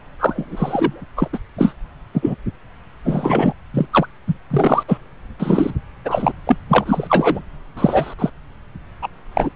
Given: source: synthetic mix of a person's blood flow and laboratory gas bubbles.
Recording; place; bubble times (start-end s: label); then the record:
Doppler ultrasound of blood flow; subclavian vein
0.18-1.04 s: bubbles
1.17-1.28 s: bubbles
1.33-1.38 s: bubbles
1.58-1.73 s: bubbles
2.13-2.35 s: bubbles
3.05-3.53 s: bubbles
3.73-3.86 s: bubbles
3.92-4.07 s: bubbles
4.27-4.34 s: bubbles
4.50-4.83 s: bubbles
4.88-4.98 s: bubbles
5.39-5.71 s: bubbles
6.05-6.33 s: bubbles
6.47-6.57 s: bubbles
6.69-7.40 s: bubbles
7.77-8.14 s: bubbles
8.18-8.30 s: bubbles
9.02-9.08 s: bubbles
9.33-9.49 s: bubbles
From the record:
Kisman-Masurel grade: 243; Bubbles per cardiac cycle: several, 3 to 8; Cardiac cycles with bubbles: 100%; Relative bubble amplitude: loud (0.450 to 0.775); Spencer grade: 3 (all of the cardiac periods contain showers or single bubble signals, but not dominating or overriding the cardiac motion signals); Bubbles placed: anywhere in the cardiac cycle